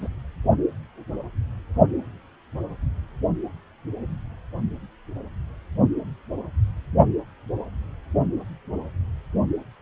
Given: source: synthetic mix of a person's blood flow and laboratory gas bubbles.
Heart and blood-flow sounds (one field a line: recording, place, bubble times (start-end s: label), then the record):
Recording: Doppler ultrasound of blood flow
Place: precordium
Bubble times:
0.00-0.09 s: bubbles
From the record:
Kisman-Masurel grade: 111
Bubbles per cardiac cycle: 1 to 2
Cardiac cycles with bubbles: 1 to 10%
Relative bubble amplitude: barely perceptible (0.100 to 0.250)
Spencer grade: 1 (occasional bubble signal discernible with the cardiac motion signal, with majority of cardiac periods free of bubbles)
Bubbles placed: only in the low amplitude regions of the cardiac cycle